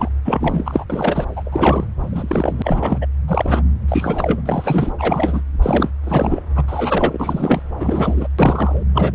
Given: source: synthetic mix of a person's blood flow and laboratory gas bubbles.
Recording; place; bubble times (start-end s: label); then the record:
Doppler ultrasound of blood flow; subclavian vein
0.00-0.09 s: bubbles
0.25-0.84 s: bubbles
0.90-1.27 s: bubbles
1.36-1.86 s: bubbles
2.00-2.98 s: bubbles
3.01-3.06 s: bubbles
3.28-3.63 s: bubbles
3.88-4.40 s: bubbles
4.45-4.92 s: bubbles
4.98-5.42 s: bubbles
5.62-5.91 s: bubbles
6.04-6.42 s: bubbles
6.55-6.64 s: bubbles
6.67-7.62 s: bubbles
7.79-8.28 s: bubbles
8.39-8.83 s: bubbles
8.95-9.15 s: bubbles
From the record:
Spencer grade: 3 (all of the cardiac periods contain showers or single bubble signals, but not dominating or overriding the cardiac motion signals); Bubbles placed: anywhere in the cardiac cycle